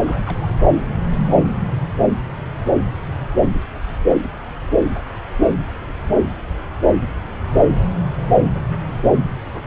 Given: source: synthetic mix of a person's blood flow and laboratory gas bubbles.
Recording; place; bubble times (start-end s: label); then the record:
Doppler ultrasound of blood flow; subclavian vein
0.03-0.22 s: bubbles
0.25-0.69 s: bubbles
From the record:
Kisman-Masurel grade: 211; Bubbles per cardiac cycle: several, 3 to 8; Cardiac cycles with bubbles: 1 to 10%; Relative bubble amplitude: barely perceptible (0.100 to 0.250); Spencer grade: 1 (occasional bubble signal discernible with the cardiac motion signal, with majority of cardiac periods free of bubbles); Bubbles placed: anywhere in the cardiac cycle